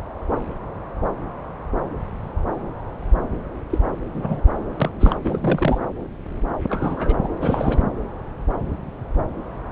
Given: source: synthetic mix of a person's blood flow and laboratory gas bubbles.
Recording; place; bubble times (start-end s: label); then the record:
Doppler ultrasound of blood flow; subclavian vein
3.70-3.79 s: bubbles
4.15-4.41 s: bubbles
4.80-4.91 s: bubbles
5.00-5.17 s: bubbles
5.22-5.79 s: bubbles
6.69-7.15 s: bubbles
7.23-7.28 s: bubbles
7.41-7.90 s: bubbles
From the record:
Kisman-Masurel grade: 222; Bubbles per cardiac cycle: several, 3 to 8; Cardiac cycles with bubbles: 10 to 50%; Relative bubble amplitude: moderate (0.250 to 0.450); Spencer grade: 2 (many but less than half of the cardiac periods contain bubble signals, singularly or in groups); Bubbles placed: anywhere in the cardiac cycle